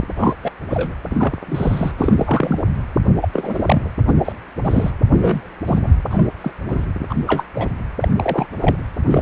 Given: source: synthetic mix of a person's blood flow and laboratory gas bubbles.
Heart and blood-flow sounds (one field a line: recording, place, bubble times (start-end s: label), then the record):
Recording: Doppler ultrasound of blood flow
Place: precordium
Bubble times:
0.15-0.34 s: bubbles
0.42-0.51 s: bubbles
0.70-0.94 s: bubbles
1.10-1.37 s: bubbles
1.48-1.94 s: bubbles
1.98-2.70 s: bubbles
3.04-3.12 s: bubbles
3.21-3.28 s: bubbles
3.33-3.88 s: bubbles
4.07-4.12 s: bubbles
4.25-4.33 s: bubbles
4.64-4.91 s: bubbles
5.09-5.41 s: bubbles
5.67-5.79 s: bubbles
5.82-5.88 s: bubbles
6.10-6.25 s: bubbles
6.41-6.51 s: bubbles
6.67-6.86 s: bubbles
7.09-7.15 s: bubbles
7.26-7.44 s: bubbles
7.55-7.68 s: bubbles
8.00-8.08 s: bubbles
8.16-8.47 s: bubbles
8.61-8.76 s: bubbles
9.10-9.21 s: bubbles
From the record:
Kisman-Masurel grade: 242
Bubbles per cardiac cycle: several, 3 to 8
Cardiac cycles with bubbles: 100%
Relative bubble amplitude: moderate (0.250 to 0.450)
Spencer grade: 3 (all of the cardiac periods contain showers or single bubble signals, but not dominating or overriding the cardiac motion signals)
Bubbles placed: anywhere in the cardiac cycle